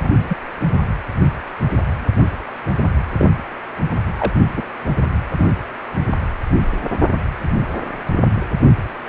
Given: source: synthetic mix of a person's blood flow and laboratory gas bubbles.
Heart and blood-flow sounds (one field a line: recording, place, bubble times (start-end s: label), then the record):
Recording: Doppler ultrasound of blood flow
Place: precordium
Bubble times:
0.02-0.11 s: bubbles
0.29-0.35 s: bubbles
3.18-3.27 s: bubbles
4.19-4.32 s: bubbles
4.56-4.62 s: bubbles
5.37-5.54 s: bubbles
From the record:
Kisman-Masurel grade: 122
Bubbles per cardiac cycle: 1 to 2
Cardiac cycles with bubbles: 10 to 50%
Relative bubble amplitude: moderate (0.250 to 0.450)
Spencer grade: 2 (many but less than half of the cardiac periods contain bubble signals, singularly or in groups)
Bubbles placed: anywhere in the cardiac cycle